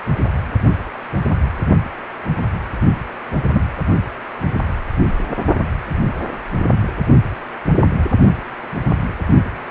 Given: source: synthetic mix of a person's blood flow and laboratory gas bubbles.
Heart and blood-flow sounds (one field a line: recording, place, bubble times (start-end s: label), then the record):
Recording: Doppler ultrasound of blood flow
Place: precordium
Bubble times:
3.52-3.62 s: bubbles
From the record:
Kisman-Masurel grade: 113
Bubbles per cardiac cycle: 1 to 2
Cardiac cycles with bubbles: 1 to 10%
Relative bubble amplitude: loud (0.450 to 0.775)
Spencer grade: 1 (occasional bubble signal discernible with the cardiac motion signal, with majority of cardiac periods free of bubbles)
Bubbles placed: only in the low amplitude regions of the cardiac cycle